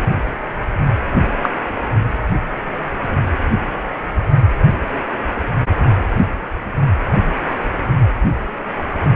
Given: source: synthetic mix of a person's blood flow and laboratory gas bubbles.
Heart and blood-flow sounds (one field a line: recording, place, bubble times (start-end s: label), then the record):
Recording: Doppler ultrasound of blood flow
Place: precordium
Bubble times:
1.42-1.49 s: bubbles
From the record:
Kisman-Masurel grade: 113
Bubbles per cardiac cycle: 1 to 2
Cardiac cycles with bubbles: 1 to 10%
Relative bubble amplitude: loud (0.450 to 0.775)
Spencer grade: 1 (occasional bubble signal discernible with the cardiac motion signal, with majority of cardiac periods free of bubbles)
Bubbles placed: anywhere in the cardiac cycle